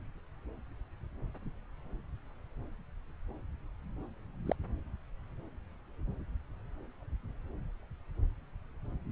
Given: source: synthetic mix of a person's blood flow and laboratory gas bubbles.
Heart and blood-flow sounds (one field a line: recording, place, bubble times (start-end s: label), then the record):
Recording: Doppler ultrasound of blood flow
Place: subclavian vein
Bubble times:
4.46-4.53 s: bubbles
From the record:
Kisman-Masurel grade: 121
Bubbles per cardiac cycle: 1 to 2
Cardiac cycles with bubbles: 10 to 50%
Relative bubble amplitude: barely perceptible (0.100 to 0.250)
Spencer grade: 2 (many but less than half of the cardiac periods contain bubble signals, singularly or in groups)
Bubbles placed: anywhere in the cardiac cycle